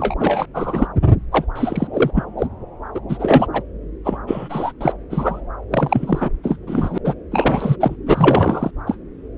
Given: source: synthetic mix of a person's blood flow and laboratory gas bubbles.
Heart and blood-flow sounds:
Doppler ultrasound of blood flow; subclavian vein
0.00-0.15 s: bubbles
0.20-0.46 s: bubbles
0.54-0.87 s: bubbles
1.31-1.46 s: bubbles
1.56-1.88 s: bubbles
1.93-2.10 s: bubbles
2.13-2.24 s: bubbles
2.38-2.47 s: bubbles
2.94-3.00 s: bubbles
3.08-3.46 s: bubbles
3.52-3.62 s: bubbles
4.04-4.18 s: bubbles
4.27-4.72 s: bubbles
4.80-4.93 s: bubbles
5.09-5.42 s: bubbles
5.71-6.29 s: bubbles
6.43-6.57 s: bubbles
6.67-6.98 s: bubbles
7.04-7.14 s: bubbles
7.31-7.76 s: bubbles
7.80-7.95 s: bubbles
8.07-8.71 s: bubbles
8.87-8.96 s: bubbles
From the record:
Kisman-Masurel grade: 343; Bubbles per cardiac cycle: rolling drumbeat, 9 or more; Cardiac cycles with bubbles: 100%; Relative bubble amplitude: loud (0.450 to 0.775); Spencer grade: 3 (all of the cardiac periods contain showers or single bubble signals, but not dominating or overriding the cardiac motion signals); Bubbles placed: anywhere in the cardiac cycle

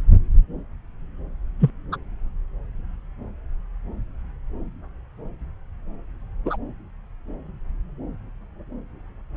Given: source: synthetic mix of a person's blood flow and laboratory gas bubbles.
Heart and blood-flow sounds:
Doppler ultrasound of blood flow; subclavian vein
1.59-1.70 s: bubbles
1.92-1.96 s: bubbles
6.45-6.57 s: bubbles
From the record:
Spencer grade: 2 (many but less than half of the cardiac periods contain bubble signals, singularly or in groups); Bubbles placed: anywhere in the cardiac cycle

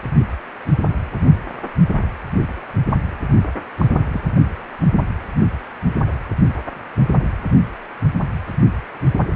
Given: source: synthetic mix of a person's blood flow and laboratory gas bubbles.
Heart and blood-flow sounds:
Doppler ultrasound of blood flow; precordium
3.77-3.87 s: bubbles
4.12-4.24 s: bubbles
From the record:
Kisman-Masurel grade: 112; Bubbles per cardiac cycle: 1 to 2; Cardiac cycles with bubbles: 1 to 10%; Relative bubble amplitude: moderate (0.250 to 0.450); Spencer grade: 1 (occasional bubble signal discernible with the cardiac motion signal, with majority of cardiac periods free of bubbles); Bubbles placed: anywhere in the cardiac cycle

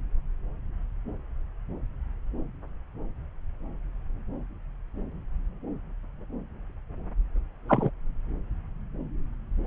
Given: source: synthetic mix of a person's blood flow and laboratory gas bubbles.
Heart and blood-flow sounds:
Doppler ultrasound of blood flow; subclavian vein
7.68-7.90 s: bubbles
From the record:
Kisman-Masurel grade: 113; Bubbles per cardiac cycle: 1 to 2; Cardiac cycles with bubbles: 1 to 10%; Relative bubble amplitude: loud (0.450 to 0.775); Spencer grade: 1 (occasional bubble signal discernible with the cardiac motion signal, with majority of cardiac periods free of bubbles); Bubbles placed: anywhere in the cardiac cycle

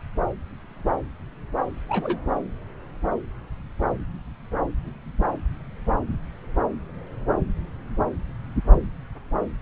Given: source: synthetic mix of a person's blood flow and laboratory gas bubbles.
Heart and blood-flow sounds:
Doppler ultrasound of blood flow; subclavian vein
1.89-2.18 s: bubbles
From the record:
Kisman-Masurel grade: 111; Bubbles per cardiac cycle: 1 to 2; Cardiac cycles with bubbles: 1 to 10%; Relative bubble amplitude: barely perceptible (0.100 to 0.250); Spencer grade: 1 (occasional bubble signal discernible with the cardiac motion signal, with majority of cardiac periods free of bubbles); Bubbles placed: anywhere in the cardiac cycle

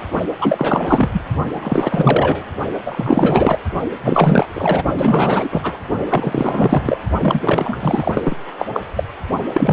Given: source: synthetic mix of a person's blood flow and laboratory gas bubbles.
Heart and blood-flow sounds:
Doppler ultrasound of blood flow; precordium
0.00-0.04 s: bubbles
0.39-1.21 s: bubbles
1.52-2.46 s: bubbles
2.85-3.57 s: bubbles
4.02-4.48 s: bubbles
4.54-4.83 s: bubbles
4.97-5.77 s: bubbles
6.09-6.97 s: bubbles
7.20-8.37 s: bubbles
8.58-8.66 s: bubbles
8.73-8.80 s: bubbles
8.96-9.04 s: bubbles
9.53-9.73 s: bubbles
From the record:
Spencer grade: 4 (maximum detectable bubble signal sounding continuously throughout systole and diastole of every cardiac period, and overriding the amplitude of the normal cardiac signals); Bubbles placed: only in the low amplitude regions of the cardiac cycle

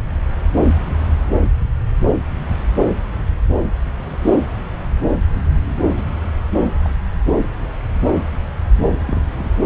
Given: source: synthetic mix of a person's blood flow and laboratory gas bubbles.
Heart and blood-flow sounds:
Doppler ultrasound of blood flow; subclavian vein
4.07-4.18 s: bubbles
4.24-4.36 s: bubbles
5.87-6.04 s: bubbles
6.62-6.66 s: bubbles
6.83-6.89 s: bubbles
9.05-9.21 s: bubbles
9.38-9.49 s: bubbles
From the record:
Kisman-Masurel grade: 121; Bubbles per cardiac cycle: 1 to 2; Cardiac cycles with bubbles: 10 to 50%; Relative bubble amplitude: barely perceptible (0.100 to 0.250); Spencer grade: 2 (many but less than half of the cardiac periods contain bubble signals, singularly or in groups); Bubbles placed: anywhere in the cardiac cycle

